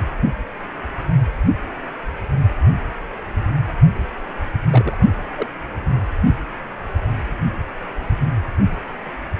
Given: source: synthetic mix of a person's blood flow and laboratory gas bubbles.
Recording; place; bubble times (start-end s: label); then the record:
Doppler ultrasound of blood flow; precordium
4.70-4.96 s: bubbles
5.35-5.46 s: bubbles
From the record:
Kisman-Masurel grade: 121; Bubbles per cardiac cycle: 1 to 2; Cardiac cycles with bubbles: 10 to 50%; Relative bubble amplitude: barely perceptible (0.100 to 0.250); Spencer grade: 2 (many but less than half of the cardiac periods contain bubble signals, singularly or in groups); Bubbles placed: only in the low amplitude regions of the cardiac cycle